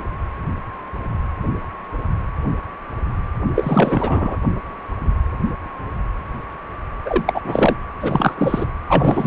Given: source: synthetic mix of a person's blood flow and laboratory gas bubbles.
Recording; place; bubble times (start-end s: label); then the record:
Doppler ultrasound of blood flow; precordium
3.55-4.37 s: bubbles
7.05-7.42 s: bubbles
7.44-7.75 s: bubbles
8.00-8.35 s: bubbles
8.38-8.66 s: bubbles
8.88-9.27 s: bubbles
From the record:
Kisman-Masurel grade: 333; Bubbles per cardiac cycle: rolling drumbeat, 9 or more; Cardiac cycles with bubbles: 50 to 99%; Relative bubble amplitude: loud (0.450 to 0.775); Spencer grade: 3 (all of the cardiac periods contain showers or single bubble signals, but not dominating or overriding the cardiac motion signals); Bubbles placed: anywhere in the cardiac cycle